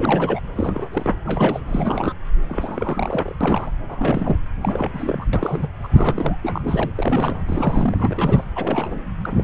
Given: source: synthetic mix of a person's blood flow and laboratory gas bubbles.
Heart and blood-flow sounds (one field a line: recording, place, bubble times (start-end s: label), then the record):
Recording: Doppler ultrasound of blood flow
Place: subclavian vein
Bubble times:
0.00-0.40 s: bubbles
0.55-0.89 s: bubbles
0.92-1.14 s: bubbles
1.25-1.60 s: bubbles
1.67-2.14 s: bubbles
2.48-3.35 s: bubbles
3.41-3.72 s: bubbles
3.88-4.37 s: bubbles
4.61-5.25 s: bubbles
5.33-5.68 s: bubbles
5.83-6.38 s: bubbles
6.42-6.91 s: bubbles
6.96-7.43 s: bubbles
7.46-8.44 s: bubbles
8.55-9.00 s: bubbles
9.24-9.44 s: bubbles
From the record:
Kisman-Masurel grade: 342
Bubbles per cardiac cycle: rolling drumbeat, 9 or more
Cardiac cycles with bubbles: 100%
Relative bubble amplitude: moderate (0.250 to 0.450)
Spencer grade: 3 (all of the cardiac periods contain showers or single bubble signals, but not dominating or overriding the cardiac motion signals)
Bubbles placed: anywhere in the cardiac cycle